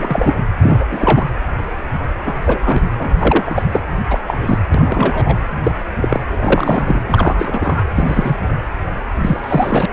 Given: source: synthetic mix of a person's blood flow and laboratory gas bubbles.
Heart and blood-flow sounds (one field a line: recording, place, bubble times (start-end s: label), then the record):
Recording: Doppler ultrasound of blood flow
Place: precordium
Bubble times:
0.00-0.35 s: bubbles
0.62-0.85 s: bubbles
0.89-1.26 s: bubbles
2.25-2.35 s: bubbles
2.45-2.59 s: bubbles
2.64-2.79 s: bubbles
2.99-3.12 s: bubbles
3.19-3.62 s: bubbles
3.70-3.81 s: bubbles
4.09-4.21 s: bubbles
4.27-4.58 s: bubbles
4.74-5.38 s: bubbles
5.64-5.71 s: bubbles
6.01-6.21 s: bubbles
6.32-7.02 s: bubbles
7.08-7.82 s: bubbles
7.95-8.37 s: bubbles
9.21-9.86 s: bubbles
From the record:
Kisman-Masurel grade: 243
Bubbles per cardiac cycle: several, 3 to 8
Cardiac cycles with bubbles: 100%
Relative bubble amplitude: loud (0.450 to 0.775)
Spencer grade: 3 (all of the cardiac periods contain showers or single bubble signals, but not dominating or overriding the cardiac motion signals)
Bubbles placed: anywhere in the cardiac cycle